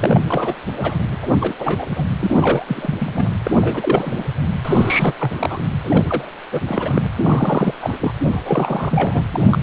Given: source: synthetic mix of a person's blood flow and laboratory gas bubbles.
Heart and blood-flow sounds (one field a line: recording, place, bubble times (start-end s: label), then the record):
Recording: Doppler ultrasound of blood flow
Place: precordium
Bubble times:
0.00-0.23 s: bubbles
0.27-0.56 s: bubbles
0.76-0.99 s: bubbles
1.09-1.18 s: bubbles
1.22-1.29 s: bubbles
1.41-1.54 s: bubbles
1.58-1.86 s: bubbles
1.90-2.04 s: bubbles
2.20-2.95 s: bubbles
2.98-3.32 s: bubbles
3.44-4.23 s: bubbles
4.65-5.14 s: bubbles
5.20-5.64 s: bubbles
5.83-6.33 s: bubbles
6.51-6.61 s: bubbles
6.66-7.07 s: bubbles
7.16-7.74 s: bubbles
7.82-8.13 s: bubbles
8.27-9.24 s: bubbles
9.30-9.59 s: bubbles
From the record:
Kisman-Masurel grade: 342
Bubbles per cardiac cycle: rolling drumbeat, 9 or more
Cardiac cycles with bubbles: 100%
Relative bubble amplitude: moderate (0.250 to 0.450)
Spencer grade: 3 (all of the cardiac periods contain showers or single bubble signals, but not dominating or overriding the cardiac motion signals)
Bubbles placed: anywhere in the cardiac cycle